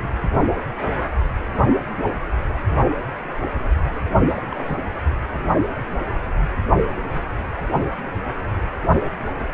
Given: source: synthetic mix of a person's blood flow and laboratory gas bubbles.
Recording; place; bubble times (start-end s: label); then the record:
Doppler ultrasound of blood flow; precordium
4.17-4.25 s: bubbles
4.28-4.33 s: bubbles
4.36-4.42 s: bubbles
4.51-4.77 s: bubbles
From the record:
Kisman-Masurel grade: 211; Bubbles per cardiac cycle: several, 3 to 8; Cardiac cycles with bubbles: 1 to 10%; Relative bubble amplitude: barely perceptible (0.100 to 0.250); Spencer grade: 1 (occasional bubble signal discernible with the cardiac motion signal, with majority of cardiac periods free of bubbles); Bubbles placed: anywhere in the cardiac cycle